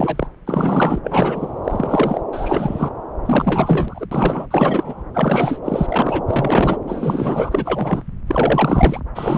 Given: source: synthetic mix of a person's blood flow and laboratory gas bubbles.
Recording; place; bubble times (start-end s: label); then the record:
Doppler ultrasound of blood flow; subclavian vein
0.00-0.28 s: bubbles
0.46-0.99 s: bubbles
1.03-1.53 s: bubbles
1.64-2.21 s: bubbles
2.33-2.89 s: bubbles
3.25-4.06 s: bubbles
4.11-4.46 s: bubbles
4.50-5.04 s: bubbles
5.14-5.59 s: bubbles
5.64-6.21 s: bubbles
6.27-6.77 s: bubbles
6.87-8.03 s: bubbles
8.27-9.00 s: bubbles
9.15-9.38 s: bubbles
From the record:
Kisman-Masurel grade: 343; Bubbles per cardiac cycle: rolling drumbeat, 9 or more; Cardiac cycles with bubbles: 100%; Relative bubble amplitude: loud (0.450 to 0.775); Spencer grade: 3 (all of the cardiac periods contain showers or single bubble signals, but not dominating or overriding the cardiac motion signals); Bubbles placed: anywhere in the cardiac cycle